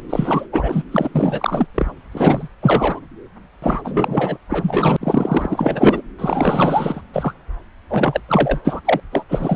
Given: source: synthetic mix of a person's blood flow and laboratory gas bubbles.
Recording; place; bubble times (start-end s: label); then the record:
Doppler ultrasound of blood flow; subclavian vein
0.09-0.47 s: bubbles
0.52-0.84 s: bubbles
0.92-1.67 s: bubbles
1.74-1.91 s: bubbles
2.11-2.48 s: bubbles
2.62-3.00 s: bubbles
3.62-3.81 s: bubbles
3.84-4.38 s: bubbles
4.49-4.96 s: bubbles
5.00-6.02 s: bubbles
6.18-7.03 s: bubbles
7.13-7.34 s: bubbles
7.89-8.21 s: bubbles
8.28-8.60 s: bubbles
8.64-8.81 s: bubbles
8.85-9.00 s: bubbles
9.12-9.25 s: bubbles
9.29-9.56 s: bubbles
From the record:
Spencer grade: 4 (maximum detectable bubble signal sounding continuously throughout systole and diastole of every cardiac period, and overriding the amplitude of the normal cardiac signals); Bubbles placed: anywhere in the cardiac cycle